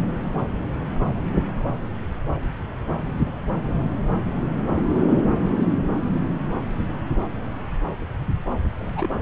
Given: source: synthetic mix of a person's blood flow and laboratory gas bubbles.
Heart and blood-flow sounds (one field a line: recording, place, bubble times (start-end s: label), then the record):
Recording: Doppler ultrasound of blood flow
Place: subclavian vein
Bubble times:
8.79-9.10 s: bubbles
From the record:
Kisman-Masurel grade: 211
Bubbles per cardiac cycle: several, 3 to 8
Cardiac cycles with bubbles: 1 to 10%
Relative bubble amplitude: barely perceptible (0.100 to 0.250)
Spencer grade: 1 (occasional bubble signal discernible with the cardiac motion signal, with majority of cardiac periods free of bubbles)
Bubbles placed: anywhere in the cardiac cycle